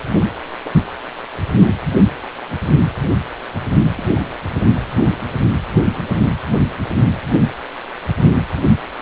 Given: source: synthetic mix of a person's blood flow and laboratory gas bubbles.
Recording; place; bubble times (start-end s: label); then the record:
Doppler ultrasound of blood flow; precordium
0.64-0.71 s: bubbles
3.97-4.04 s: bubbles
5.06-5.10 s: bubbles
From the record:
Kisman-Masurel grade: 121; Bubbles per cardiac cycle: 1 to 2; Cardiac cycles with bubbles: 10 to 50%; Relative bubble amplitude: barely perceptible (0.100 to 0.250); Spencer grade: 2 (many but less than half of the cardiac periods contain bubble signals, singularly or in groups); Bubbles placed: anywhere in the cardiac cycle